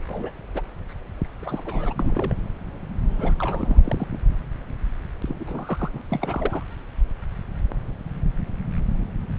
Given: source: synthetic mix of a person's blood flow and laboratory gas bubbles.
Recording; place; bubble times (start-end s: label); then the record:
Doppler ultrasound of blood flow; subclavian vein
0.08-0.31 s: bubbles
0.54-0.61 s: bubbles
1.42-1.62 s: bubbles
1.65-1.94 s: bubbles
1.99-2.34 s: bubbles
3.17-4.06 s: bubbles
4.13-4.18 s: bubbles
5.28-5.89 s: bubbles
5.93-6.01 s: bubbles
6.10-6.63 s: bubbles
From the record:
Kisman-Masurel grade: 221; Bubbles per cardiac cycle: several, 3 to 8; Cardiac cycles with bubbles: 10 to 50%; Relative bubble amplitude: barely perceptible (0.100 to 0.250); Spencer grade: 2 (many but less than half of the cardiac periods contain bubble signals, singularly or in groups); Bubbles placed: anywhere in the cardiac cycle